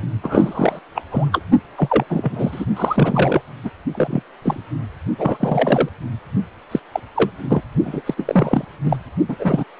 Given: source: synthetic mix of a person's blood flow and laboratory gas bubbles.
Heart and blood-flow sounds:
Doppler ultrasound of blood flow; precordium
0.22-0.79 s: bubbles
0.95-1.02 s: bubbles
1.12-1.29 s: bubbles
1.32-1.43 s: bubbles
1.76-2.04 s: bubbles
2.10-2.65 s: bubbles
2.76-3.42 s: bubbles
3.62-3.70 s: bubbles
3.94-4.23 s: bubbles
4.42-4.60 s: bubbles
5.18-5.89 s: bubbles
6.71-6.80 s: bubbles
6.92-7.00 s: bubbles
7.15-7.31 s: bubbles
7.42-7.61 s: bubbles
7.84-8.01 s: bubbles
8.06-8.14 s: bubbles
8.17-8.65 s: bubbles
8.84-8.96 s: bubbles
9.28-9.36 s: bubbles
9.39-9.64 s: bubbles
From the record:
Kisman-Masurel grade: 243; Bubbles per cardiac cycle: several, 3 to 8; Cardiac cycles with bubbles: 100%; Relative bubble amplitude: loud (0.450 to 0.775); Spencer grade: 3 (all of the cardiac periods contain showers or single bubble signals, but not dominating or overriding the cardiac motion signals); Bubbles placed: only in the low amplitude regions of the cardiac cycle

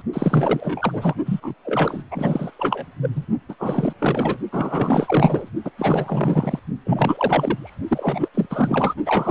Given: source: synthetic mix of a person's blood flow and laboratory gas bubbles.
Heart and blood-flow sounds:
Doppler ultrasound of blood flow; precordium
0.00-0.02 s: bubbles
0.12-1.15 s: bubbles
1.25-1.54 s: bubbles
1.65-2.03 s: bubbles
2.10-2.51 s: bubbles
2.59-2.85 s: bubbles
3.02-3.10 s: bubbles
3.15-3.25 s: bubbles
3.48-3.55 s: bubbles
3.59-3.93 s: bubbles
3.98-4.39 s: bubbles
4.52-5.51 s: bubbles
5.64-5.71 s: bubbles
5.78-6.60 s: bubbles
6.86-7.77 s: bubbles
7.88-8.28 s: bubbles
8.34-8.46 s: bubbles
8.50-8.94 s: bubbles
9.05-9.31 s: bubbles
From the record:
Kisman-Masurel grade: 444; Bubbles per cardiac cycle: continuous sound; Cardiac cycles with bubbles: 100%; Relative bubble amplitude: maximal (0.775 to 0.999); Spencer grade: 4 (maximum detectable bubble signal sounding continuously throughout systole and diastole of every cardiac period, and overriding the amplitude of the normal cardiac signals); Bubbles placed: only in the low amplitude regions of the cardiac cycle

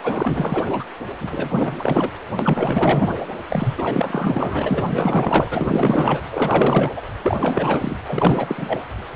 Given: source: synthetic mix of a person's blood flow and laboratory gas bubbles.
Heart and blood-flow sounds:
Doppler ultrasound of blood flow; precordium
0.03-0.65 s: bubbles
0.68-0.84 s: bubbles
1.19-2.12 s: bubbles
2.39-3.11 s: bubbles
3.50-6.21 s: bubbles
6.31-6.92 s: bubbles
6.96-7.01 s: bubbles
7.23-7.37 s: bubbles
7.40-7.98 s: bubbles
8.07-8.80 s: bubbles
From the record:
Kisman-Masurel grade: 444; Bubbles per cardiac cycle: continuous sound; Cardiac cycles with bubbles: 100%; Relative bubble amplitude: maximal (0.775 to 0.999); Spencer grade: 4 (maximum detectable bubble signal sounding continuously throughout systole and diastole of every cardiac period, and overriding the amplitude of the normal cardiac signals); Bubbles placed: anywhere in the cardiac cycle

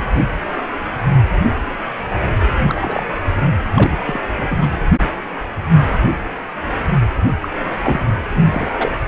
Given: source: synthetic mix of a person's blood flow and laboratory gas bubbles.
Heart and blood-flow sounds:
Doppler ultrasound of blood flow; precordium
0.00-0.04 s: bubbles
2.67-3.03 s: bubbles
3.74-3.97 s: bubbles
4.05-4.19 s: bubbles
4.35-4.70 s: bubbles
7.42-7.50 s: bubbles
7.83-8.04 s: bubbles
8.29-8.46 s: bubbles
8.51-8.92 s: bubbles
From the record:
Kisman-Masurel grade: 222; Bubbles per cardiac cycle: several, 3 to 8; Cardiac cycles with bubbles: 10 to 50%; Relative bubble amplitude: moderate (0.250 to 0.450); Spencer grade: 2 (many but less than half of the cardiac periods contain bubble signals, singularly or in groups); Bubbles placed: anywhere in the cardiac cycle

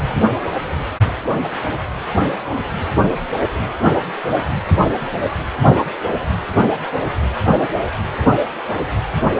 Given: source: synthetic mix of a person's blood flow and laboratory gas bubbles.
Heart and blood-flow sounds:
Doppler ultrasound of blood flow; precordium
0.00-0.17 s: bubbles
From the record:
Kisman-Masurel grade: 211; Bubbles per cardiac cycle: several, 3 to 8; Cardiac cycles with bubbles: 1 to 10%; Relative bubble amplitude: barely perceptible (0.100 to 0.250); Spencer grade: 1 (occasional bubble signal discernible with the cardiac motion signal, with majority of cardiac periods free of bubbles); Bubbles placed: anywhere in the cardiac cycle

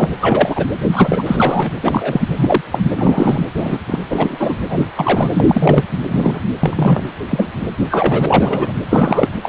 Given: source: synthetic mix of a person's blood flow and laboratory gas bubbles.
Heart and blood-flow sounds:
Doppler ultrasound of blood flow; precordium
0.00-0.10 s: bubbles
0.21-0.66 s: bubbles
0.91-1.23 s: bubbles
1.26-1.72 s: bubbles
1.81-2.28 s: bubbles
2.35-2.61 s: bubbles
2.72-2.81 s: bubbles
2.96-3.46 s: bubbles
3.56-3.79 s: bubbles
3.87-3.99 s: bubbles
4.10-4.58 s: bubbles
4.70-4.86 s: bubbles
4.96-5.83 s: bubbles
6.06-6.41 s: bubbles
6.63-7.04 s: bubbles
7.30-7.48 s: bubbles
7.90-8.72 s: bubbles
8.90-9.29 s: bubbles
9.43-9.49 s: bubbles
From the record:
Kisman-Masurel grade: 233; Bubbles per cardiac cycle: several, 3 to 8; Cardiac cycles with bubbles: 50 to 99%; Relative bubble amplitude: loud (0.450 to 0.775); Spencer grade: 3 (all of the cardiac periods contain showers or single bubble signals, but not dominating or overriding the cardiac motion signals); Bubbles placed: anywhere in the cardiac cycle

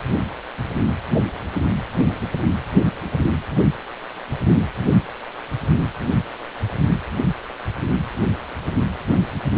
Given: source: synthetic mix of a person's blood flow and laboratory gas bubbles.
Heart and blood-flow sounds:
Doppler ultrasound of blood flow; precordium
no bubbles
From the record:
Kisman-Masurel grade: 000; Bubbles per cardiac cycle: 0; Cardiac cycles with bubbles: 0%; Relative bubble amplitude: no bubbles discernible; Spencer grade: 0 (complete lack of bubble signals)

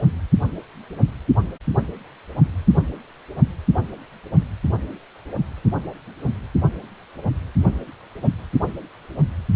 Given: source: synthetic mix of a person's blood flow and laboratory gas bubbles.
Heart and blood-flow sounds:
Doppler ultrasound of blood flow; precordium
no bubbles
From the record:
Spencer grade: 0 (complete lack of bubble signals)

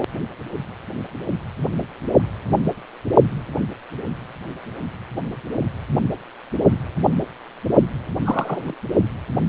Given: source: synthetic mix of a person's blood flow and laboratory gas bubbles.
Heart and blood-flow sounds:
Doppler ultrasound of blood flow; precordium
8.24-8.75 s: bubbles
From the record:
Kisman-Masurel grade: 112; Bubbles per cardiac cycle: 1 to 2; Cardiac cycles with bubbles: 1 to 10%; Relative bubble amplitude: moderate (0.250 to 0.450); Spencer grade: 1 (occasional bubble signal discernible with the cardiac motion signal, with majority of cardiac periods free of bubbles); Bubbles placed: only in the low amplitude regions of the cardiac cycle

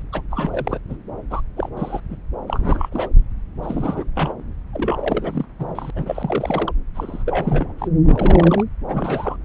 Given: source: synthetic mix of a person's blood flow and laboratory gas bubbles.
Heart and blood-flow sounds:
Doppler ultrasound of blood flow; subclavian vein
0.00-0.03 s: bubbles
0.12-0.22 s: bubbles
0.30-0.79 s: bubbles
0.89-0.96 s: bubbles
1.30-1.41 s: bubbles
1.56-1.69 s: bubbles
1.77-2.00 s: bubbles
2.09-2.16 s: bubbles
2.47-2.89 s: bubbles
2.92-3.09 s: bubbles
3.62-4.04 s: bubbles
4.15-4.33 s: bubbles
4.73-5.46 s: bubbles
5.59-5.91 s: bubbles
5.95-6.72 s: bubbles
6.95-7.24 s: bubbles
7.26-7.73 s: bubbles
7.78-7.88 s: bubbles
8.04-8.64 s: bubbles
8.88-9.36 s: bubbles
From the record:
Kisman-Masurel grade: 332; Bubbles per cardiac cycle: rolling drumbeat, 9 or more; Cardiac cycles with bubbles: 50 to 99%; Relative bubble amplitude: moderate (0.250 to 0.450); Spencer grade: 3 (all of the cardiac periods contain showers or single bubble signals, but not dominating or overriding the cardiac motion signals); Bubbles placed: anywhere in the cardiac cycle

